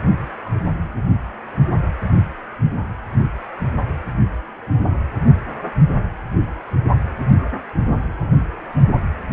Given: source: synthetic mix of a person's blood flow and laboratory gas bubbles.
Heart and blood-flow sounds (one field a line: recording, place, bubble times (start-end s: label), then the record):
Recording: Doppler ultrasound of blood flow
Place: precordium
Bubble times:
no bubbles
From the record:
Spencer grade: 0 (complete lack of bubble signals)